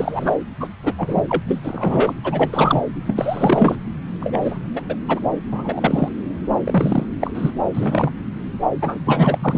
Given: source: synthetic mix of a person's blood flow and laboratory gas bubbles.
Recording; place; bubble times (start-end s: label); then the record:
Doppler ultrasound of blood flow; subclavian vein
0.00-0.35 s: bubbles
0.60-0.68 s: bubbles
0.83-0.93 s: bubbles
0.97-1.21 s: bubbles
1.28-1.43 s: bubbles
1.47-1.60 s: bubbles
1.63-2.13 s: bubbles
2.24-2.81 s: bubbles
3.02-3.77 s: bubbles
4.19-4.58 s: bubbles
4.74-4.81 s: bubbles
4.88-4.96 s: bubbles
5.08-5.19 s: bubbles
5.52-6.08 s: bubbles
6.64-7.06 s: bubbles
7.21-7.31 s: bubbles
7.34-7.50 s: bubbles
7.73-8.12 s: bubbles
8.81-8.98 s: bubbles
9.05-9.58 s: bubbles
From the record:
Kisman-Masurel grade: 243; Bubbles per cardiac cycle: several, 3 to 8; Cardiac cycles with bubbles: 100%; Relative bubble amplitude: loud (0.450 to 0.775); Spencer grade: 3 (all of the cardiac periods contain showers or single bubble signals, but not dominating or overriding the cardiac motion signals); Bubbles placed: anywhere in the cardiac cycle